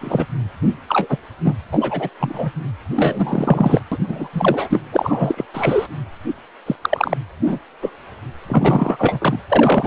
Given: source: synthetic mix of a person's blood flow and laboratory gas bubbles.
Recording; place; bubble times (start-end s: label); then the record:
Doppler ultrasound of blood flow; precordium
0.01-0.26 s: bubbles
0.88-1.17 s: bubbles
1.44-1.54 s: bubbles
1.71-2.10 s: bubbles
2.20-2.51 s: bubbles
2.96-3.81 s: bubbles
3.92-3.98 s: bubbles
4.07-4.28 s: bubbles
4.33-4.79 s: bubbles
4.92-5.45 s: bubbles
5.53-5.87 s: bubbles
6.66-6.75 s: bubbles
6.81-7.17 s: bubbles
7.46-7.58 s: bubbles
7.81-7.90 s: bubbles
8.48-9.39 s: bubbles
9.50-9.87 s: bubbles
From the record:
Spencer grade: 3 (all of the cardiac periods contain showers or single bubble signals, but not dominating or overriding the cardiac motion signals); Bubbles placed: anywhere in the cardiac cycle